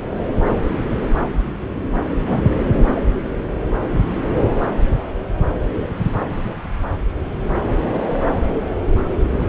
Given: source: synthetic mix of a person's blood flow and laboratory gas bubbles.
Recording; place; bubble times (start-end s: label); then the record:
Doppler ultrasound of blood flow; subclavian vein
2.17-2.55 s: bubbles
From the record:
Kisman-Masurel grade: 113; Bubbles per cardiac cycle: 1 to 2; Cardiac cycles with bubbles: 1 to 10%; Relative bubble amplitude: loud (0.450 to 0.775); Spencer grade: 1 (occasional bubble signal discernible with the cardiac motion signal, with majority of cardiac periods free of bubbles); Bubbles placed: anywhere in the cardiac cycle